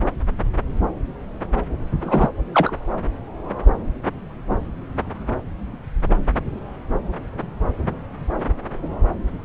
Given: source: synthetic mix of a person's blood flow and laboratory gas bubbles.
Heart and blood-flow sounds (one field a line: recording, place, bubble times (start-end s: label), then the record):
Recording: Doppler ultrasound of blood flow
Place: subclavian vein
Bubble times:
2.01-2.30 s: bubbles
2.53-2.76 s: bubbles
From the record:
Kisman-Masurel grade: 113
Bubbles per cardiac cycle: 1 to 2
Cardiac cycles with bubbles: 1 to 10%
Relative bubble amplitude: loud (0.450 to 0.775)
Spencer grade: 1 (occasional bubble signal discernible with the cardiac motion signal, with majority of cardiac periods free of bubbles)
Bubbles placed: anywhere in the cardiac cycle